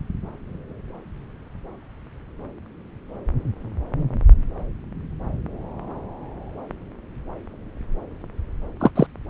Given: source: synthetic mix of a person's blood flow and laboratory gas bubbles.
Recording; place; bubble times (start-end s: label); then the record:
Doppler ultrasound of blood flow; subclavian vein
8.80-8.91 s: bubbles
8.96-9.07 s: bubbles
From the record:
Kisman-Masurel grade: 113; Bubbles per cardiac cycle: 1 to 2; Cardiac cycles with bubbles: 1 to 10%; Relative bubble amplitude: loud (0.450 to 0.775); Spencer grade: 1 (occasional bubble signal discernible with the cardiac motion signal, with majority of cardiac periods free of bubbles); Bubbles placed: anywhere in the cardiac cycle